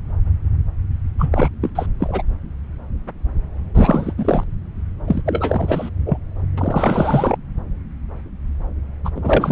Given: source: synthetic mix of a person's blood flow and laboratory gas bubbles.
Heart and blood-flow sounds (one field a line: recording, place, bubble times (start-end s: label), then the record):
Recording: Doppler ultrasound of blood flow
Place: subclavian vein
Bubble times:
1.19-1.48 s: bubbles
1.61-1.70 s: bubbles
1.75-1.86 s: bubbles
2.00-2.22 s: bubbles
3.75-4.13 s: bubbles
4.17-4.44 s: bubbles
5.07-5.22 s: bubbles
5.25-5.89 s: bubbles
6.05-6.17 s: bubbles
6.58-7.37 s: bubbles
9.05-9.10 s: bubbles
9.15-9.52 s: bubbles
From the record:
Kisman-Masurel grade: 333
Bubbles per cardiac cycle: rolling drumbeat, 9 or more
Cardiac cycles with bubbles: 50 to 99%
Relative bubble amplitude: loud (0.450 to 0.775)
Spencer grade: 3 (all of the cardiac periods contain showers or single bubble signals, but not dominating or overriding the cardiac motion signals)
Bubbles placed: anywhere in the cardiac cycle